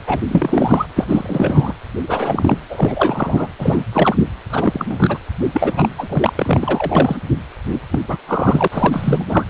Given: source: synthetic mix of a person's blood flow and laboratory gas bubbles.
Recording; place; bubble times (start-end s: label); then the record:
Doppler ultrasound of blood flow; precordium
0.07-0.20 s: bubbles
0.28-0.85 s: bubbles
0.95-1.06 s: bubbles
1.08-1.73 s: bubbles
2.07-2.58 s: bubbles
2.70-3.48 s: bubbles
3.58-3.83 s: bubbles
3.92-4.22 s: bubbles
4.50-5.18 s: bubbles
5.54-5.89 s: bubbles
5.98-6.33 s: bubbles
6.35-7.17 s: bubbles
7.71-7.79 s: bubbles
7.91-7.99 s: bubbles
8.08-8.17 s: bubbles
8.27-8.68 s: bubbles
8.71-9.45 s: bubbles
From the record:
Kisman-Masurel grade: 342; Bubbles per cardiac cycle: rolling drumbeat, 9 or more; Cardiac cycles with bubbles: 100%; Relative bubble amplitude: moderate (0.250 to 0.450); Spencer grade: 3 (all of the cardiac periods contain showers or single bubble signals, but not dominating or overriding the cardiac motion signals); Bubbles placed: anywhere in the cardiac cycle